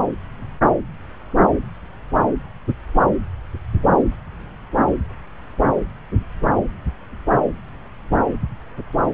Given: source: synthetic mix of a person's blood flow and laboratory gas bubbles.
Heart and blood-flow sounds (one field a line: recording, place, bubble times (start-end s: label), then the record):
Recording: Doppler ultrasound of blood flow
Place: subclavian vein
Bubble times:
no bubbles
From the record:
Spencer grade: 0 (complete lack of bubble signals)